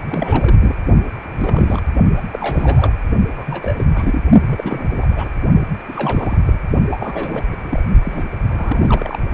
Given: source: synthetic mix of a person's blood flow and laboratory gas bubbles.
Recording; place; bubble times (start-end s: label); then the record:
Doppler ultrasound of blood flow; precordium
0.10-0.75 s: bubbles
1.23-1.81 s: bubbles
2.16-2.25 s: bubbles
2.29-2.92 s: bubbles
3.30-3.84 s: bubbles
3.94-4.21 s: bubbles
4.46-5.07 s: bubbles
5.10-5.29 s: bubbles
5.88-6.38 s: bubbles
6.46-6.59 s: bubbles
6.91-7.42 s: bubbles
7.51-7.56 s: bubbles
7.61-7.83 s: bubbles
8.02-8.30 s: bubbles
8.49-9.19 s: bubbles
From the record:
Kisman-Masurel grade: 342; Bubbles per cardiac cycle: rolling drumbeat, 9 or more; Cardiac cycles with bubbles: 100%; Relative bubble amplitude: moderate (0.250 to 0.450); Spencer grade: 3 (all of the cardiac periods contain showers or single bubble signals, but not dominating or overriding the cardiac motion signals); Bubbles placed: only in the low amplitude regions of the cardiac cycle